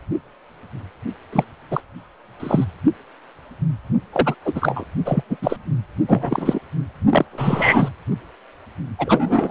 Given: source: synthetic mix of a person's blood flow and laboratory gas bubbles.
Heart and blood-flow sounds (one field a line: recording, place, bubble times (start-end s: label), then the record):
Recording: Doppler ultrasound of blood flow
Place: precordium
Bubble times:
1.32-1.44 s: bubbles
1.71-1.80 s: bubbles
2.40-2.65 s: bubbles
4.12-4.35 s: bubbles
4.45-4.85 s: bubbles
5.05-5.22 s: bubbles
5.29-5.37 s: bubbles
5.42-5.57 s: bubbles
6.08-6.59 s: bubbles
7.09-7.25 s: bubbles
7.31-7.88 s: bubbles
8.98-9.51 s: bubbles
From the record:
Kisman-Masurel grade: 233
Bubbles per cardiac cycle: several, 3 to 8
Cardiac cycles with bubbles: 50 to 99%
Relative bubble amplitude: loud (0.450 to 0.775)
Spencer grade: 3 (all of the cardiac periods contain showers or single bubble signals, but not dominating or overriding the cardiac motion signals)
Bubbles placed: anywhere in the cardiac cycle